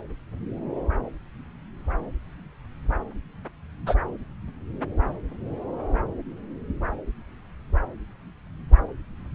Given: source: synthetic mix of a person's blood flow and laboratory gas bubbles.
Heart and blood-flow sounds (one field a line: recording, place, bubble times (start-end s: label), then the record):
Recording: Doppler ultrasound of blood flow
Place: subclavian vein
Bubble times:
3.87-3.96 s: bubbles
From the record:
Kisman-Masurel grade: 113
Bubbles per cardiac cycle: 1 to 2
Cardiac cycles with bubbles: 1 to 10%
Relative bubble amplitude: loud (0.450 to 0.775)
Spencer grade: 1 (occasional bubble signal discernible with the cardiac motion signal, with majority of cardiac periods free of bubbles)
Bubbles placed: anywhere in the cardiac cycle